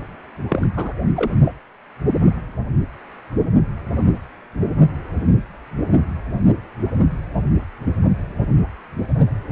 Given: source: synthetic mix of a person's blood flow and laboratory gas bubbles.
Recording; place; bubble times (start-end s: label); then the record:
Doppler ultrasound of blood flow; precordium
0.50-0.70 s: bubbles
0.76-0.93 s: bubbles
1.16-1.32 s: bubbles
1.41-1.55 s: bubbles
From the record:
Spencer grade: 2 (many but less than half of the cardiac periods contain bubble signals, singularly or in groups); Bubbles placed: only in the low amplitude regions of the cardiac cycle